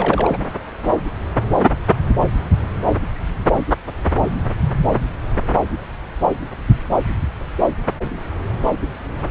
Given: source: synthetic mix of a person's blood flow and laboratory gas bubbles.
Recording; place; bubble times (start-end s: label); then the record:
Doppler ultrasound of blood flow; subclavian vein
0.00-0.37 s: bubbles
From the record:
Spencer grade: 1 (occasional bubble signal discernible with the cardiac motion signal, with majority of cardiac periods free of bubbles); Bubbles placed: anywhere in the cardiac cycle